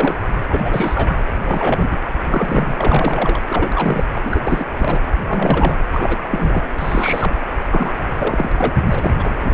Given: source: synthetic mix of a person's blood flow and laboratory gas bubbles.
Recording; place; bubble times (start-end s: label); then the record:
Doppler ultrasound of blood flow; precordium
0.00-0.15 s: bubbles
0.50-1.15 s: bubbles
1.44-1.98 s: bubbles
2.10-2.12 s: bubbles
2.24-3.41 s: bubbles
3.48-4.04 s: bubbles
4.25-4.40 s: bubbles
4.45-4.64 s: bubbles
4.79-5.01 s: bubbles
5.29-5.75 s: bubbles
5.90-6.64 s: bubbles
6.78-7.34 s: bubbles
7.71-7.91 s: bubbles
8.16-8.50 s: bubbles
8.57-8.74 s: bubbles
8.90-9.11 s: bubbles
9.19-9.37 s: bubbles
9.40-9.54 s: bubbles
From the record:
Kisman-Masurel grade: 342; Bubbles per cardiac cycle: rolling drumbeat, 9 or more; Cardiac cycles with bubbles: 100%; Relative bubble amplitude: moderate (0.250 to 0.450); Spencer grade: 3 (all of the cardiac periods contain showers or single bubble signals, but not dominating or overriding the cardiac motion signals); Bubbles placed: anywhere in the cardiac cycle